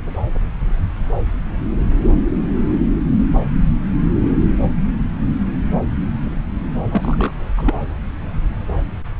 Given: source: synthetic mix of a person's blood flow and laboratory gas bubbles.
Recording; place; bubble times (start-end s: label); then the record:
Doppler ultrasound of blood flow; subclavian vein
6.88-7.33 s: bubbles
7.57-7.86 s: bubbles
From the record:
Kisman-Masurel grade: 222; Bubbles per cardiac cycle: several, 3 to 8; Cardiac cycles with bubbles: 10 to 50%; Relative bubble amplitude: moderate (0.250 to 0.450); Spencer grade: 2 (many but less than half of the cardiac periods contain bubble signals, singularly or in groups); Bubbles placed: anywhere in the cardiac cycle